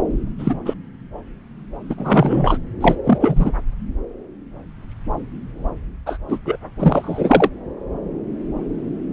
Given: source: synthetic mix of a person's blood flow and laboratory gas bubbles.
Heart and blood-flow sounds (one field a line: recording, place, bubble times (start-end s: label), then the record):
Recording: Doppler ultrasound of blood flow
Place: subclavian vein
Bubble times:
0.38-0.54 s: bubbles
0.65-0.74 s: bubbles
1.89-2.58 s: bubbles
2.81-2.96 s: bubbles
3.05-3.52 s: bubbles
6.06-6.18 s: bubbles
6.28-6.38 s: bubbles
6.46-6.58 s: bubbles
6.79-7.50 s: bubbles
From the record:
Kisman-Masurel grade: 233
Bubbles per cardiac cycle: several, 3 to 8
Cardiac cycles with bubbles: 50 to 99%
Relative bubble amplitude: loud (0.450 to 0.775)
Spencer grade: 3 (all of the cardiac periods contain showers or single bubble signals, but not dominating or overriding the cardiac motion signals)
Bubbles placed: anywhere in the cardiac cycle